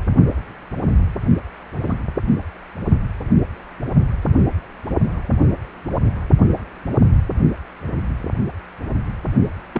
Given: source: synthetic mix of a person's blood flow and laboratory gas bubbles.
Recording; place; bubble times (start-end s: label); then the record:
Doppler ultrasound of blood flow; precordium
1.75-1.98 s: bubbles
9.74-9.79 s: bubbles
From the record:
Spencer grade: 2 (many but less than half of the cardiac periods contain bubble signals, singularly or in groups); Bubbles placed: only in the low amplitude regions of the cardiac cycle